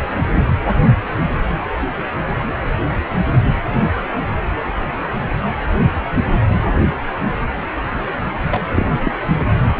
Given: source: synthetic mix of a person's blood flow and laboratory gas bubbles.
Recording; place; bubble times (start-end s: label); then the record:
Doppler ultrasound of blood flow; precordium
8.50-8.60 s: bubbles
8.75-8.86 s: bubbles
9.03-9.12 s: bubbles
From the record:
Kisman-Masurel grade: 213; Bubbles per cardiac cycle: several, 3 to 8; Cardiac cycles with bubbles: 1 to 10%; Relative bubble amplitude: loud (0.450 to 0.775); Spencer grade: 1 (occasional bubble signal discernible with the cardiac motion signal, with majority of cardiac periods free of bubbles); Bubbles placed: anywhere in the cardiac cycle